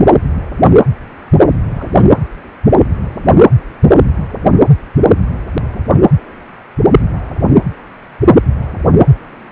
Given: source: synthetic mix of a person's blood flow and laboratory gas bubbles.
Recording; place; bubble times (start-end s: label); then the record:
Doppler ultrasound of blood flow; precordium
1.66-2.05 s: bubbles
From the record:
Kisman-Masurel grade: 211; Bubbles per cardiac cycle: several, 3 to 8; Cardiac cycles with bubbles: 1 to 10%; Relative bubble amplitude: barely perceptible (0.100 to 0.250); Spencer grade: 1 (occasional bubble signal discernible with the cardiac motion signal, with majority of cardiac periods free of bubbles); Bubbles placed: anywhere in the cardiac cycle